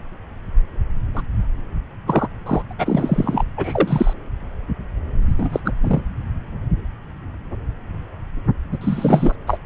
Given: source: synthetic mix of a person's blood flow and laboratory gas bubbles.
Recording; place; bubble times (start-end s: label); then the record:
Doppler ultrasound of blood flow; subclavian vein
1.14-1.24 s: bubbles
2.06-2.27 s: bubbles
2.46-2.62 s: bubbles
2.70-2.73 s: bubbles
2.78-3.44 s: bubbles
3.56-4.14 s: bubbles
5.25-5.62 s: bubbles
5.65-5.73 s: bubbles
5.81-6.02 s: bubbles
8.71-8.78 s: bubbles
8.81-9.36 s: bubbles
9.46-9.59 s: bubbles
From the record:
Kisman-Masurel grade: 233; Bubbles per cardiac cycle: several, 3 to 8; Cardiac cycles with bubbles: 50 to 99%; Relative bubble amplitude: loud (0.450 to 0.775); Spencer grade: 3 (all of the cardiac periods contain showers or single bubble signals, but not dominating or overriding the cardiac motion signals); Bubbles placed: anywhere in the cardiac cycle